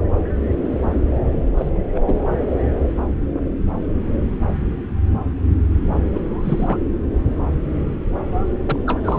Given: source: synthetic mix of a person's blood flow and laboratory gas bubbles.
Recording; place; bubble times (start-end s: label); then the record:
Doppler ultrasound of blood flow; subclavian vein
1.57-1.69 s: bubbles
1.94-2.00 s: bubbles
2.05-2.20 s: bubbles
6.12-6.22 s: bubbles
6.43-6.79 s: bubbles
8.66-8.79 s: bubbles
8.87-9.01 s: bubbles
9.04-9.19 s: bubbles
From the record:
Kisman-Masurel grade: 222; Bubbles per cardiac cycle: several, 3 to 8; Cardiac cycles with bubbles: 10 to 50%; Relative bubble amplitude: moderate (0.250 to 0.450); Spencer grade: 2 (many but less than half of the cardiac periods contain bubble signals, singularly or in groups); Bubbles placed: anywhere in the cardiac cycle